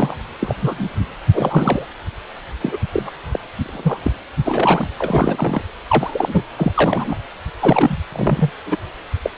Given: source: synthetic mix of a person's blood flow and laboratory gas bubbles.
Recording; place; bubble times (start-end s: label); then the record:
Doppler ultrasound of blood flow; precordium
0.00-0.17 s: bubbles
0.40-0.54 s: bubbles
0.57-1.04 s: bubbles
1.33-1.86 s: bubbles
2.60-2.80 s: bubbles
2.93-3.11 s: bubbles
3.31-3.39 s: bubbles
3.64-4.11 s: bubbles
4.43-4.89 s: bubbles
4.98-5.61 s: bubbles
5.88-6.43 s: bubbles
6.57-6.72 s: bubbles
6.75-7.16 s: bubbles
7.61-7.98 s: bubbles
8.12-8.50 s: bubbles
8.66-8.77 s: bubbles
9.23-9.30 s: bubbles
From the record:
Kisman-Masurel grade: 243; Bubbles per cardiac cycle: several, 3 to 8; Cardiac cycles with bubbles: 100%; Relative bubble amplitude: loud (0.450 to 0.775); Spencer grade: 3 (all of the cardiac periods contain showers or single bubble signals, but not dominating or overriding the cardiac motion signals); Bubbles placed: anywhere in the cardiac cycle